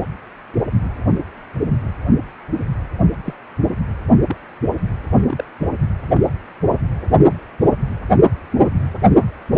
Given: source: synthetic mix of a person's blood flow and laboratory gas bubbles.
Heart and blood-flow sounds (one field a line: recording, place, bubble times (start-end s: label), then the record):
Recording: Doppler ultrasound of blood flow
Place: precordium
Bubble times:
3.24-3.34 s: bubbles
4.27-4.36 s: bubbles
5.27-5.44 s: bubbles
6.12-6.21 s: bubbles
From the record:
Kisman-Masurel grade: 121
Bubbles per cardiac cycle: 1 to 2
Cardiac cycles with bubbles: 10 to 50%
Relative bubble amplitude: barely perceptible (0.100 to 0.250)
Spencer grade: 2 (many but less than half of the cardiac periods contain bubble signals, singularly or in groups)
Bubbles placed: anywhere in the cardiac cycle